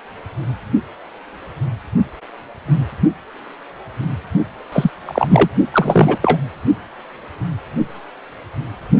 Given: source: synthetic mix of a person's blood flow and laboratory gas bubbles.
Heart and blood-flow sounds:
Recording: Doppler ultrasound of blood flow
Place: precordium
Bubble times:
4.72-4.91 s: bubbles
5.05-5.49 s: bubbles
5.72-6.18 s: bubbles
6.22-6.38 s: bubbles
From the record:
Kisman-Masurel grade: 223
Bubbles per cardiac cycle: several, 3 to 8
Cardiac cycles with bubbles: 10 to 50%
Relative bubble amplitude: loud (0.450 to 0.775)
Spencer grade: 2 (many but less than half of the cardiac periods contain bubble signals, singularly or in groups)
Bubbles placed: only in the low amplitude regions of the cardiac cycle

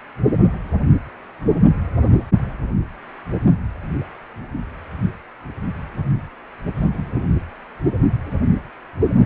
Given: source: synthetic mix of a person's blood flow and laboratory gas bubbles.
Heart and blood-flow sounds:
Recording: Doppler ultrasound of blood flow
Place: precordium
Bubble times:
6.75-6.88 s: bubbles
6.93-7.35 s: bubbles
From the record:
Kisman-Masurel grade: 111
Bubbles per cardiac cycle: 1 to 2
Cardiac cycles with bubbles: 1 to 10%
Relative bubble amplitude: barely perceptible (0.100 to 0.250)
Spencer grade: 1 (occasional bubble signal discernible with the cardiac motion signal, with majority of cardiac periods free of bubbles)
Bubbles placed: anywhere in the cardiac cycle

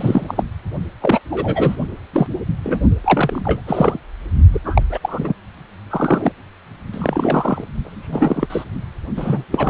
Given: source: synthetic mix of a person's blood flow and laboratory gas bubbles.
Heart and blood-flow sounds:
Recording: Doppler ultrasound of blood flow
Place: precordium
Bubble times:
0.00-0.44 s: bubbles
1.00-1.19 s: bubbles
1.30-1.75 s: bubbles
2.13-2.27 s: bubbles
2.64-2.82 s: bubbles
3.04-3.61 s: bubbles
3.67-3.98 s: bubbles
4.54-4.59 s: bubbles
4.64-4.83 s: bubbles
4.89-4.98 s: bubbles
5.01-5.33 s: bubbles
5.89-6.32 s: bubbles
6.92-7.64 s: bubbles
7.83-8.46 s: bubbles
8.50-8.65 s: bubbles
9.17-9.45 s: bubbles
9.52-9.70 s: bubbles
From the record:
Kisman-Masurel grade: 243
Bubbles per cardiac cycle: several, 3 to 8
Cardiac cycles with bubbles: 100%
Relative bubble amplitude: loud (0.450 to 0.775)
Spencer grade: 3 (all of the cardiac periods contain showers or single bubble signals, but not dominating or overriding the cardiac motion signals)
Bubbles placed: only in the low amplitude regions of the cardiac cycle

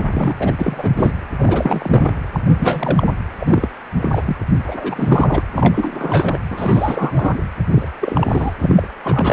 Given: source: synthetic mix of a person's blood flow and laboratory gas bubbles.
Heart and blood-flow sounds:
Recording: Doppler ultrasound of blood flow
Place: precordium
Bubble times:
0.00-0.03 s: bubbles
0.12-0.36 s: bubbles
0.39-0.53 s: bubbles
0.59-1.12 s: bubbles
1.38-2.19 s: bubbles
2.33-2.40 s: bubbles
2.47-3.15 s: bubbles
3.40-3.68 s: bubbles
3.97-4.22 s: bubbles
4.25-4.37 s: bubbles
4.67-5.43 s: bubbles
5.53-6.39 s: bubbles
6.50-7.38 s: bubbles
7.71-7.88 s: bubbles
8.01-8.53 s: bubbles
8.60-8.88 s: bubbles
9.03-9.33 s: bubbles
From the record:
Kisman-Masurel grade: 342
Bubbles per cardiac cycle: rolling drumbeat, 9 or more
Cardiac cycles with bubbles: 100%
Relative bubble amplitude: moderate (0.250 to 0.450)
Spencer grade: 3 (all of the cardiac periods contain showers or single bubble signals, but not dominating or overriding the cardiac motion signals)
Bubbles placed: anywhere in the cardiac cycle

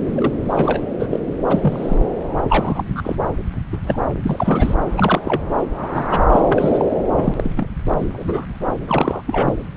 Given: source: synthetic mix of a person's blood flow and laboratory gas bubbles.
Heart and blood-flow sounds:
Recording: Doppler ultrasound of blood flow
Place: subclavian vein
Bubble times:
0.15-0.35 s: bubbles
0.49-0.82 s: bubbles
0.99-1.07 s: bubbles
1.10-1.19 s: bubbles
1.47-1.98 s: bubbles
2.48-3.02 s: bubbles
3.04-3.16 s: bubbles
3.73-3.78 s: bubbles
3.83-3.99 s: bubbles
4.23-4.74 s: bubbles
4.96-5.21 s: bubbles
5.24-5.42 s: bubbles
5.76-6.04 s: bubbles
6.09-6.22 s: bubbles
6.32-6.40 s: bubbles
6.47-6.85 s: bubbles
7.14-7.33 s: bubbles
7.36-7.50 s: bubbles
7.56-7.67 s: bubbles
7.96-8.08 s: bubbles
8.12-8.46 s: bubbles
8.87-9.21 s: bubbles
9.24-9.69 s: bubbles
From the record:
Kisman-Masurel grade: 242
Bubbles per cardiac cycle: several, 3 to 8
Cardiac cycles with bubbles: 100%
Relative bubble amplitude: moderate (0.250 to 0.450)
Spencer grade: 3 (all of the cardiac periods contain showers or single bubble signals, but not dominating or overriding the cardiac motion signals)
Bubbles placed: anywhere in the cardiac cycle

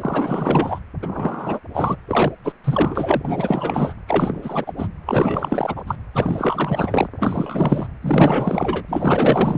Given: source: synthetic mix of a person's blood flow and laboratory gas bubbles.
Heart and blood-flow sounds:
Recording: Doppler ultrasound of blood flow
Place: precordium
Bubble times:
0.00-0.80 s: bubbles
1.02-1.59 s: bubbles
1.74-1.97 s: bubbles
2.07-2.32 s: bubbles
2.44-2.52 s: bubbles
2.64-3.94 s: bubbles
4.07-4.73 s: bubbles
4.77-4.88 s: bubbles
5.06-5.82 s: bubbles
5.87-5.96 s: bubbles
6.13-7.07 s: bubbles
7.16-7.88 s: bubbles
8.01-8.84 s: bubbles
8.88-9.58 s: bubbles
From the record:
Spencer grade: 4 (maximum detectable bubble signal sounding continuously throughout systole and diastole of every cardiac period, and overriding the amplitude of the normal cardiac signals)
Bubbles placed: anywhere in the cardiac cycle

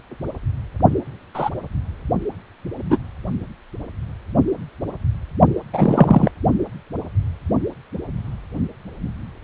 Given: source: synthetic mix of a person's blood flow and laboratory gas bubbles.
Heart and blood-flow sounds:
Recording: Doppler ultrasound of blood flow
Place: precordium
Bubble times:
1.34-1.49 s: bubbles
2.90-2.98 s: bubbles
5.73-6.31 s: bubbles
From the record:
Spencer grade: 2 (many but less than half of the cardiac periods contain bubble signals, singularly or in groups)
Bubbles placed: only in the low amplitude regions of the cardiac cycle

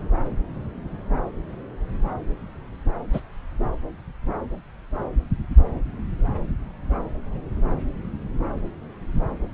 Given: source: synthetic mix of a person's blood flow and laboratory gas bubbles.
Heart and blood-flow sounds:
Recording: Doppler ultrasound of blood flow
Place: subclavian vein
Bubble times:
3.13-3.20 s: bubbles
From the record:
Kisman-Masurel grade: 112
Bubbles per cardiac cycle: 1 to 2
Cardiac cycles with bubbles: 1 to 10%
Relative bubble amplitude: moderate (0.250 to 0.450)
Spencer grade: 1 (occasional bubble signal discernible with the cardiac motion signal, with majority of cardiac periods free of bubbles)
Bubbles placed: anywhere in the cardiac cycle

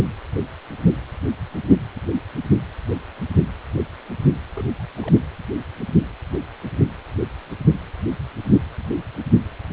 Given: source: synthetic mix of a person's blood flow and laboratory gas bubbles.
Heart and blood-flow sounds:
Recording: Doppler ultrasound of blood flow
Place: precordium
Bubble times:
4.57-4.63 s: bubbles
4.79-4.85 s: bubbles
4.96-5.12 s: bubbles
From the record:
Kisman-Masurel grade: 211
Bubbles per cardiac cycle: several, 3 to 8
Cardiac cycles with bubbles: 1 to 10%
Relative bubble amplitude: barely perceptible (0.100 to 0.250)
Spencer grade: 1 (occasional bubble signal discernible with the cardiac motion signal, with majority of cardiac periods free of bubbles)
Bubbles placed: anywhere in the cardiac cycle

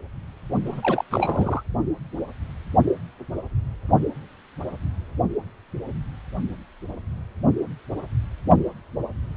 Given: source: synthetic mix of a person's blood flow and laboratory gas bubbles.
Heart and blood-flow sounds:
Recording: Doppler ultrasound of blood flow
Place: precordium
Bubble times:
0.66-1.05 s: bubbles
1.10-1.63 s: bubbles
From the record:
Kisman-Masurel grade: 212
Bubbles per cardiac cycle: several, 3 to 8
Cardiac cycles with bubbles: 1 to 10%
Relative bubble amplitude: moderate (0.250 to 0.450)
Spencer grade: 1 (occasional bubble signal discernible with the cardiac motion signal, with majority of cardiac periods free of bubbles)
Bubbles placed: only in the low amplitude regions of the cardiac cycle

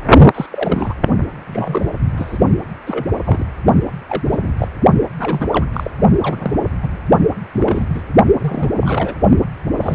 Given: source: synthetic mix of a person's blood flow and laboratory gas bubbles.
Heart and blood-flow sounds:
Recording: Doppler ultrasound of blood flow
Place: precordium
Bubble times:
0.34-0.46 s: bubbles
0.51-0.94 s: bubbles
1.47-1.90 s: bubbles
2.17-2.38 s: bubbles
2.87-3.06 s: bubbles
3.25-3.46 s: bubbles
4.09-4.23 s: bubbles
4.28-4.48 s: bubbles
4.58-4.68 s: bubbles
5.19-5.66 s: bubbles
5.73-5.91 s: bubbles
6.23-6.59 s: bubbles
6.82-6.97 s: bubbles
7.53-7.86 s: bubbles
7.94-8.02 s: bubbles
8.39-8.71 s: bubbles
8.81-9.15 s: bubbles
9.80-9.95 s: bubbles
From the record:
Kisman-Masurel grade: 242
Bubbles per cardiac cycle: several, 3 to 8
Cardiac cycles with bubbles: 100%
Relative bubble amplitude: moderate (0.250 to 0.450)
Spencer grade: 3 (all of the cardiac periods contain showers or single bubble signals, but not dominating or overriding the cardiac motion signals)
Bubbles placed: only in the low amplitude regions of the cardiac cycle

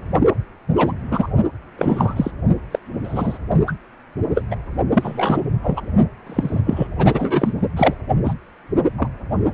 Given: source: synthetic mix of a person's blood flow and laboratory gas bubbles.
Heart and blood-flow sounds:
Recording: Doppler ultrasound of blood flow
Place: precordium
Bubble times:
0.74-0.93 s: bubbles
1.11-1.28 s: bubbles
1.78-2.31 s: bubbles
2.72-2.79 s: bubbles
3.04-3.39 s: bubbles
3.67-3.73 s: bubbles
4.34-4.44 s: bubbles
4.50-4.55 s: bubbles
4.93-5.42 s: bubbles
5.62-5.81 s: bubbles
6.26-6.61 s: bubbles
6.66-6.87 s: bubbles
6.98-7.54 s: bubbles
7.76-7.94 s: bubbles
8.24-8.33 s: bubbles
8.97-9.08 s: bubbles
From the record:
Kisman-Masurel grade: 243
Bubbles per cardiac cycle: several, 3 to 8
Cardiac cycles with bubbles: 100%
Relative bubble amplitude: loud (0.450 to 0.775)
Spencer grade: 3 (all of the cardiac periods contain showers or single bubble signals, but not dominating or overriding the cardiac motion signals)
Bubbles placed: only in the low amplitude regions of the cardiac cycle

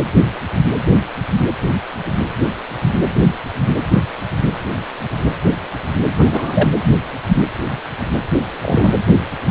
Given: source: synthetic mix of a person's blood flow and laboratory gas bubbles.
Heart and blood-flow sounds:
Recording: Doppler ultrasound of blood flow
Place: precordium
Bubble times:
6.17-6.69 s: bubbles
6.75-6.84 s: bubbles
8.62-8.95 s: bubbles
From the record:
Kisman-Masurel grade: 212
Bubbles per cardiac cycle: several, 3 to 8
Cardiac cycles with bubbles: 1 to 10%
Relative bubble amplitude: moderate (0.250 to 0.450)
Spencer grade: 1 (occasional bubble signal discernible with the cardiac motion signal, with majority of cardiac periods free of bubbles)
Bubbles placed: anywhere in the cardiac cycle

